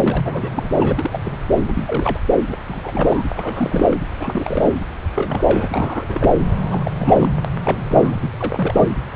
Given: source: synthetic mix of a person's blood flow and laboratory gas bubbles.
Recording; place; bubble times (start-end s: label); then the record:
Doppler ultrasound of blood flow; subclavian vein
0.04-0.70 s: bubbles
0.74-1.18 s: bubbles
1.25-1.36 s: bubbles
1.65-2.19 s: bubbles
2.51-2.56 s: bubbles
2.69-2.81 s: bubbles
2.84-3.23 s: bubbles
3.34-4.02 s: bubbles
4.19-4.74 s: bubbles
5.06-6.05 s: bubbles
6.08-6.33 s: bubbles
6.56-6.91 s: bubbles
6.97-7.29 s: bubbles
7.45-7.49 s: bubbles
7.63-7.86 s: bubbles
7.88-8.17 s: bubbles
8.21-8.30 s: bubbles
8.38-8.88 s: bubbles
From the record:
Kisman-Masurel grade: 342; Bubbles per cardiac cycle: rolling drumbeat, 9 or more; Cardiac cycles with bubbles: 100%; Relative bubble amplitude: moderate (0.250 to 0.450); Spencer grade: 3 (all of the cardiac periods contain showers or single bubble signals, but not dominating or overriding the cardiac motion signals); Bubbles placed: anywhere in the cardiac cycle